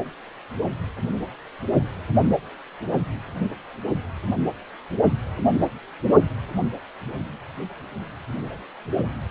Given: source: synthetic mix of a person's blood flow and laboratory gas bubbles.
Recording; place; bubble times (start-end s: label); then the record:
Doppler ultrasound of blood flow; precordium
no bubbles
From the record:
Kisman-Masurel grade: 000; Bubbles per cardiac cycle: 0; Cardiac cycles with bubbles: 0%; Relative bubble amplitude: no bubbles discernible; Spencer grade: 0 (complete lack of bubble signals)